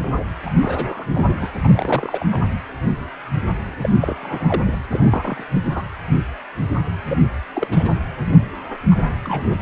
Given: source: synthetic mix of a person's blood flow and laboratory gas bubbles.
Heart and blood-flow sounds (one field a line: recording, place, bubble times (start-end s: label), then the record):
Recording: Doppler ultrasound of blood flow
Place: precordium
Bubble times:
0.01-0.23 s: bubbles
0.45-0.50 s: bubbles
0.61-1.05 s: bubbles
1.10-1.50 s: bubbles
1.63-2.26 s: bubbles
2.31-2.41 s: bubbles
3.81-3.89 s: bubbles
4.00-4.15 s: bubbles
4.22-4.62 s: bubbles
4.66-4.78 s: bubbles
4.90-5.43 s: bubbles
5.53-5.62 s: bubbles
5.65-5.83 s: bubbles
7.08-7.17 s: bubbles
7.53-7.95 s: bubbles
8.91-8.95 s: bubbles
9.24-9.43 s: bubbles
9.50-9.56 s: bubbles
From the record:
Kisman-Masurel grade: 232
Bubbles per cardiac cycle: several, 3 to 8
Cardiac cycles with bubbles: 50 to 99%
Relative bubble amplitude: moderate (0.250 to 0.450)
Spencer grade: 3 (all of the cardiac periods contain showers or single bubble signals, but not dominating or overriding the cardiac motion signals)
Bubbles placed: anywhere in the cardiac cycle